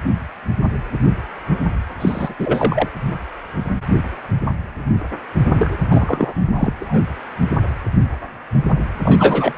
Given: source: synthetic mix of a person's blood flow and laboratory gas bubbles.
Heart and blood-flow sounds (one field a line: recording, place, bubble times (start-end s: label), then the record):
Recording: Doppler ultrasound of blood flow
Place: precordium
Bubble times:
2.00-2.34 s: bubbles
2.39-2.88 s: bubbles
5.55-5.76 s: bubbles
5.89-6.33 s: bubbles
6.56-6.74 s: bubbles
6.80-7.00 s: bubbles
9.04-9.53 s: bubbles
From the record:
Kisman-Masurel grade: 223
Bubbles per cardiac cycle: several, 3 to 8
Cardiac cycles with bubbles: 10 to 50%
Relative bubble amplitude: loud (0.450 to 0.775)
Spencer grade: 2 (many but less than half of the cardiac periods contain bubble signals, singularly or in groups)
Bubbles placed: anywhere in the cardiac cycle